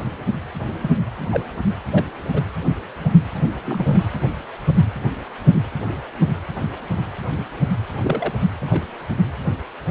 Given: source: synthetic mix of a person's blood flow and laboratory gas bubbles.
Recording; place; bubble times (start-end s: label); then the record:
Doppler ultrasound of blood flow; precordium
0.82-0.91 s: bubbles
1.30-1.44 s: bubbles
1.91-2.05 s: bubbles
2.34-2.42 s: bubbles
3.64-4.03 s: bubbles
8.03-8.33 s: bubbles
8.61-8.82 s: bubbles
From the record:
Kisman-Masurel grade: 121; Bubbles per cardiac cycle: 1 to 2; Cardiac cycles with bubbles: 10 to 50%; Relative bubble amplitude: barely perceptible (0.100 to 0.250); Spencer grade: 2 (many but less than half of the cardiac periods contain bubble signals, singularly or in groups); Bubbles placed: anywhere in the cardiac cycle